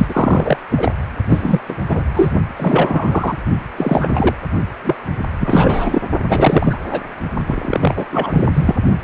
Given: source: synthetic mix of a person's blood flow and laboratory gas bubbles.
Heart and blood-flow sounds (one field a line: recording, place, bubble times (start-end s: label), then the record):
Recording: Doppler ultrasound of blood flow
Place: precordium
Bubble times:
0.00-0.57 s: bubbles
0.70-0.92 s: bubbles
1.29-1.60 s: bubbles
1.69-1.77 s: bubbles
1.88-2.10 s: bubbles
2.14-2.33 s: bubbles
2.56-3.38 s: bubbles
3.76-4.36 s: bubbles
4.84-4.95 s: bubbles
5.40-6.01 s: bubbles
6.23-6.78 s: bubbles
6.91-7.01 s: bubbles
7.46-8.05 s: bubbles
8.11-8.49 s: bubbles
8.53-8.75 s: bubbles
From the record:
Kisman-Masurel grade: 343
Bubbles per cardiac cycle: rolling drumbeat, 9 or more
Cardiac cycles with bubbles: 100%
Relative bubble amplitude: loud (0.450 to 0.775)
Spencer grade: 3 (all of the cardiac periods contain showers or single bubble signals, but not dominating or overriding the cardiac motion signals)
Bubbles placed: only in the low amplitude regions of the cardiac cycle